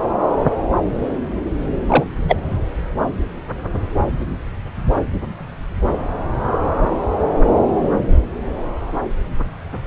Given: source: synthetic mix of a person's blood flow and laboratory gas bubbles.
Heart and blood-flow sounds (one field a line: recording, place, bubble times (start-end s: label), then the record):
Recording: Doppler ultrasound of blood flow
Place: subclavian vein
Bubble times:
1.89-2.04 s: bubbles
2.28-2.36 s: bubbles
From the record:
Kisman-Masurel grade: 113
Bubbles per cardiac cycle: 1 to 2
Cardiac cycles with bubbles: 1 to 10%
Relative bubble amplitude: loud (0.450 to 0.775)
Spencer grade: 1 (occasional bubble signal discernible with the cardiac motion signal, with majority of cardiac periods free of bubbles)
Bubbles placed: anywhere in the cardiac cycle